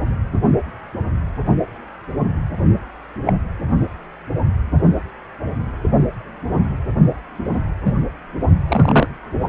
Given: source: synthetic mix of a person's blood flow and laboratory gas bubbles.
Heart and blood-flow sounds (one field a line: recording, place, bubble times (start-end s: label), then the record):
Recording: Doppler ultrasound of blood flow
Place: precordium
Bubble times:
3.25-3.33 s: bubbles
7.85-7.92 s: bubbles
8.68-9.07 s: bubbles
From the record:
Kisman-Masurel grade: 123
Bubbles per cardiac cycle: 1 to 2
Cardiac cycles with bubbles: 10 to 50%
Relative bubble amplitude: loud (0.450 to 0.775)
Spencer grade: 2 (many but less than half of the cardiac periods contain bubble signals, singularly or in groups)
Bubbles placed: only in the low amplitude regions of the cardiac cycle